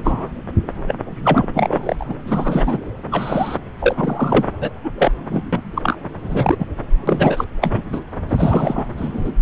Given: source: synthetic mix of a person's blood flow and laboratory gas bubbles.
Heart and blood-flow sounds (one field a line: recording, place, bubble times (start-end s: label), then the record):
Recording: Doppler ultrasound of blood flow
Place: subclavian vein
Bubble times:
0.04-0.28 s: bubbles
0.88-1.47 s: bubbles
1.54-2.05 s: bubbles
2.08-2.14 s: bubbles
2.26-2.78 s: bubbles
3.11-3.58 s: bubbles
3.79-4.44 s: bubbles
4.60-4.70 s: bubbles
4.83-4.90 s: bubbles
4.98-5.11 s: bubbles
5.29-5.43 s: bubbles
5.52-5.97 s: bubbles
6.22-6.56 s: bubbles
6.59-6.65 s: bubbles
7.07-7.44 s: bubbles
7.61-8.02 s: bubbles
8.29-8.85 s: bubbles
8.96-9.32 s: bubbles
From the record:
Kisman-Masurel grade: 243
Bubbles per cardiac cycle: several, 3 to 8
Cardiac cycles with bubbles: 100%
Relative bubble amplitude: loud (0.450 to 0.775)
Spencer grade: 3 (all of the cardiac periods contain showers or single bubble signals, but not dominating or overriding the cardiac motion signals)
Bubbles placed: anywhere in the cardiac cycle